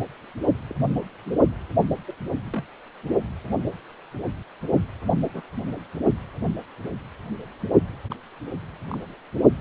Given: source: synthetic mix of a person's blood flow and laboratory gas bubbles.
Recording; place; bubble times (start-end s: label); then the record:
Doppler ultrasound of blood flow; precordium
0.00-0.02 s: bubbles
0.69-0.73 s: bubbles
1.25-1.31 s: bubbles
2.07-2.14 s: bubbles
2.54-2.64 s: bubbles
5.34-5.42 s: bubbles
8.12-8.16 s: bubbles
8.90-8.98 s: bubbles
From the record:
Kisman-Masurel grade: 121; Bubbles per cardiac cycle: 1 to 2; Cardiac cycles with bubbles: 10 to 50%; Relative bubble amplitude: barely perceptible (0.100 to 0.250); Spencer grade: 2 (many but less than half of the cardiac periods contain bubble signals, singularly or in groups); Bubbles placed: anywhere in the cardiac cycle